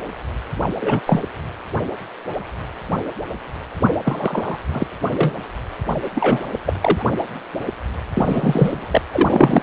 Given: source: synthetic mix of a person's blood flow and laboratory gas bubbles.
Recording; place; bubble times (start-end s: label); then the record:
Doppler ultrasound of blood flow; precordium
0.62-0.70 s: bubbles
0.79-1.02 s: bubbles
1.06-1.23 s: bubbles
4.04-4.55 s: bubbles
4.71-4.87 s: bubbles
5.13-5.31 s: bubbles
6.14-6.41 s: bubbles
6.66-6.73 s: bubbles
6.80-7.06 s: bubbles
8.14-9.02 s: bubbles
9.12-9.62 s: bubbles
From the record:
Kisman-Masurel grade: 233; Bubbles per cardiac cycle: several, 3 to 8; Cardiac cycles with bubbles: 50 to 99%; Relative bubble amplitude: loud (0.450 to 0.775); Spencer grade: 3 (all of the cardiac periods contain showers or single bubble signals, but not dominating or overriding the cardiac motion signals); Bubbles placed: anywhere in the cardiac cycle